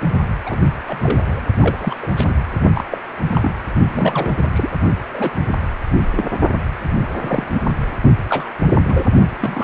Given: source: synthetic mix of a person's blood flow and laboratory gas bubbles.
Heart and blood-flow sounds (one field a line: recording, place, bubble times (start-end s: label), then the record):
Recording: Doppler ultrasound of blood flow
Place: precordium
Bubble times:
0.46-0.58 s: bubbles
0.87-1.43 s: bubbles
1.60-1.95 s: bubbles
2.02-2.07 s: bubbles
2.17-2.35 s: bubbles
2.74-2.84 s: bubbles
2.91-2.98 s: bubbles
3.23-3.52 s: bubbles
3.92-4.33 s: bubbles
4.37-4.50 s: bubbles
4.53-4.70 s: bubbles
5.15-5.30 s: bubbles
6.15-6.25 s: bubbles
7.22-7.46 s: bubbles
7.53-7.62 s: bubbles
8.28-8.48 s: bubbles
8.88-9.06 s: bubbles
9.40-9.64 s: bubbles
From the record:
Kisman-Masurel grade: 242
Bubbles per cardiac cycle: several, 3 to 8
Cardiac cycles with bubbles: 100%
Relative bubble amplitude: moderate (0.250 to 0.450)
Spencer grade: 3 (all of the cardiac periods contain showers or single bubble signals, but not dominating or overriding the cardiac motion signals)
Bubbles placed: only in the low amplitude regions of the cardiac cycle